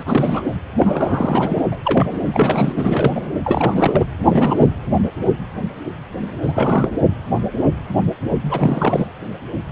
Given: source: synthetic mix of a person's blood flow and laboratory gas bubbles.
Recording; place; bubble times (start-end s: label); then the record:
Doppler ultrasound of blood flow; precordium
0.00-0.03 s: bubbles
0.06-0.43 s: bubbles
0.79-1.61 s: bubbles
1.71-1.78 s: bubbles
1.82-2.07 s: bubbles
2.24-2.73 s: bubbles
2.76-3.21 s: bubbles
3.44-4.06 s: bubbles
4.23-4.69 s: bubbles
6.42-6.92 s: bubbles
8.50-9.08 s: bubbles
From the record:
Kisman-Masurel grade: 332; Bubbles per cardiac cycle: rolling drumbeat, 9 or more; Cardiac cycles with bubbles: 50 to 99%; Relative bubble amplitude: moderate (0.250 to 0.450); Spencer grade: 3 (all of the cardiac periods contain showers or single bubble signals, but not dominating or overriding the cardiac motion signals); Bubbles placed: anywhere in the cardiac cycle